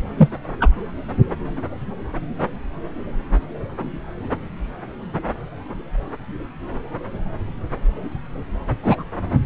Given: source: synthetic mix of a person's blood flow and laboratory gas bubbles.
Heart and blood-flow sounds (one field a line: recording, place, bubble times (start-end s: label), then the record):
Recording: Doppler ultrasound of blood flow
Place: subclavian vein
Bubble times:
0.17-0.29 s: bubbles
0.60-0.68 s: bubbles
8.82-9.03 s: bubbles
From the record:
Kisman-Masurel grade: 123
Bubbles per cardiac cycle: 1 to 2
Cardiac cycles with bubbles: 10 to 50%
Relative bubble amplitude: loud (0.450 to 0.775)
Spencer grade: 2 (many but less than half of the cardiac periods contain bubble signals, singularly or in groups)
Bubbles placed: anywhere in the cardiac cycle